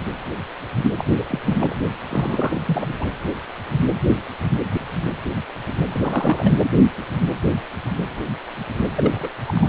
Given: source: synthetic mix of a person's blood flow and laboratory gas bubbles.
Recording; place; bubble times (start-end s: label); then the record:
Doppler ultrasound of blood flow; precordium
0.98-1.04 s: bubbles
1.08-1.25 s: bubbles
1.30-1.39 s: bubbles
1.46-1.76 s: bubbles
2.10-2.62 s: bubbles
2.66-2.95 s: bubbles
3.00-3.08 s: bubbles
5.92-6.58 s: bubbles
8.95-9.29 s: bubbles
9.47-9.69 s: bubbles
From the record:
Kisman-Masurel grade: 221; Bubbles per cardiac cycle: several, 3 to 8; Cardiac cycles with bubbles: 10 to 50%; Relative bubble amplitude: barely perceptible (0.100 to 0.250); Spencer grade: 2 (many but less than half of the cardiac periods contain bubble signals, singularly or in groups); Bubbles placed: anywhere in the cardiac cycle